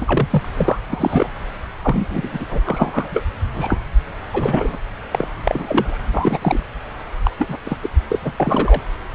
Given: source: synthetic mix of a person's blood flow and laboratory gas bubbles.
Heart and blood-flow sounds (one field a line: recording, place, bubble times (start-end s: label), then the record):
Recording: Doppler ultrasound of blood flow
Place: subclavian vein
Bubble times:
0.01-0.48 s: bubbles
0.57-0.79 s: bubbles
0.87-1.29 s: bubbles
1.82-2.60 s: bubbles
2.65-3.09 s: bubbles
3.13-3.23 s: bubbles
3.54-3.77 s: bubbles
4.33-4.78 s: bubbles
5.11-5.27 s: bubbles
5.43-6.04 s: bubbles
6.14-6.63 s: bubbles
7.25-7.30 s: bubbles
7.38-7.57 s: bubbles
7.64-7.77 s: bubbles
7.82-7.90 s: bubbles
8.09-8.32 s: bubbles
8.36-8.82 s: bubbles
From the record:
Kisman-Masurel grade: 243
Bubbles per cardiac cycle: several, 3 to 8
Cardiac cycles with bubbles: 100%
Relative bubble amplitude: loud (0.450 to 0.775)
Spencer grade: 3 (all of the cardiac periods contain showers or single bubble signals, but not dominating or overriding the cardiac motion signals)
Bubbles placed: anywhere in the cardiac cycle